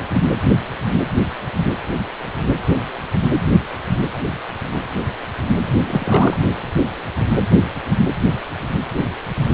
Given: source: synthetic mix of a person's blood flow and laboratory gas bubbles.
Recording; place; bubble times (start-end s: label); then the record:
Doppler ultrasound of blood flow; precordium
5.87-6.37 s: bubbles
8.97-9.05 s: bubbles
From the record:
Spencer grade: 1 (occasional bubble signal discernible with the cardiac motion signal, with majority of cardiac periods free of bubbles); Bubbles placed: anywhere in the cardiac cycle